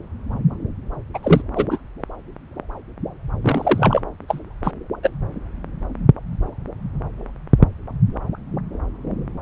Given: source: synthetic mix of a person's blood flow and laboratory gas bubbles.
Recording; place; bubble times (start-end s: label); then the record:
Doppler ultrasound of blood flow; subclavian vein
1.14-1.19 s: bubbles
1.23-1.42 s: bubbles
1.56-1.67 s: bubbles
1.71-1.78 s: bubbles
3.42-4.01 s: bubbles
4.28-4.40 s: bubbles
4.63-4.71 s: bubbles
5.03-5.10 s: bubbles
From the record:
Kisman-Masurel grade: 223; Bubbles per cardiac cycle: several, 3 to 8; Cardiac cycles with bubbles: 10 to 50%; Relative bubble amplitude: loud (0.450 to 0.775); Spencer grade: 2 (many but less than half of the cardiac periods contain bubble signals, singularly or in groups); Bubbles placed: anywhere in the cardiac cycle